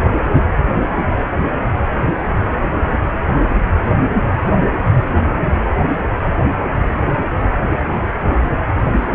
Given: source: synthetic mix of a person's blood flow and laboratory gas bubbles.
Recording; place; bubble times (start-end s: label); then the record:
Doppler ultrasound of blood flow; precordium
no bubbles
From the record:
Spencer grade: 0 (complete lack of bubble signals)